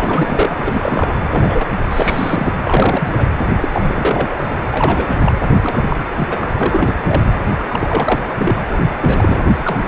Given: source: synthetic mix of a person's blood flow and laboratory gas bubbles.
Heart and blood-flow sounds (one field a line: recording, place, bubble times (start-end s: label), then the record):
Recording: Doppler ultrasound of blood flow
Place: precordium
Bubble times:
0.00-1.20 s: bubbles
1.29-1.67 s: bubbles
1.90-2.53 s: bubbles
2.62-3.28 s: bubbles
3.60-3.69 s: bubbles
3.71-5.17 s: bubbles
5.22-5.33 s: bubbles
5.62-5.96 s: bubbles
6.17-6.55 s: bubbles
6.60-7.41 s: bubbles
7.68-8.28 s: bubbles
8.38-8.61 s: bubbles
8.70-8.81 s: bubbles
9.01-9.41 s: bubbles
9.58-9.88 s: bubbles
From the record:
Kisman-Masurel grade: 342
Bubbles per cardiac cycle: rolling drumbeat, 9 or more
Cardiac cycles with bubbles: 100%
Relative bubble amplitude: moderate (0.250 to 0.450)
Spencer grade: 3 (all of the cardiac periods contain showers or single bubble signals, but not dominating or overriding the cardiac motion signals)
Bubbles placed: anywhere in the cardiac cycle